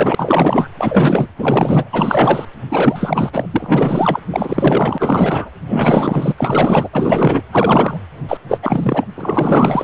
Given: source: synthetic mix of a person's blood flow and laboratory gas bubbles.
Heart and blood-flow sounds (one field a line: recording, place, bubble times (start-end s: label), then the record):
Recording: Doppler ultrasound of blood flow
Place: precordium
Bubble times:
0.00-0.68 s: bubbles
0.78-1.28 s: bubbles
1.36-1.90 s: bubbles
1.92-2.45 s: bubbles
2.69-3.30 s: bubbles
3.33-3.46 s: bubbles
3.51-4.20 s: bubbles
4.31-5.50 s: bubbles
5.67-6.33 s: bubbles
6.38-6.89 s: bubbles
6.92-7.43 s: bubbles
7.51-7.97 s: bubbles
8.28-8.38 s: bubbles
8.48-9.07 s: bubbles
9.15-9.84 s: bubbles
From the record:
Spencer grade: 4 (maximum detectable bubble signal sounding continuously throughout systole and diastole of every cardiac period, and overriding the amplitude of the normal cardiac signals)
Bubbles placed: anywhere in the cardiac cycle